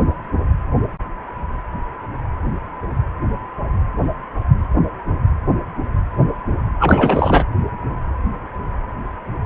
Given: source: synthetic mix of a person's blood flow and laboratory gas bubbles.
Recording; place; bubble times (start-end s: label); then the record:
Doppler ultrasound of blood flow; precordium
6.79-7.44 s: bubbles
From the record:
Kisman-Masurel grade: 213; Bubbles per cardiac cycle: several, 3 to 8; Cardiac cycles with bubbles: 1 to 10%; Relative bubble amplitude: loud (0.450 to 0.775); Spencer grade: 1 (occasional bubble signal discernible with the cardiac motion signal, with majority of cardiac periods free of bubbles); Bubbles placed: anywhere in the cardiac cycle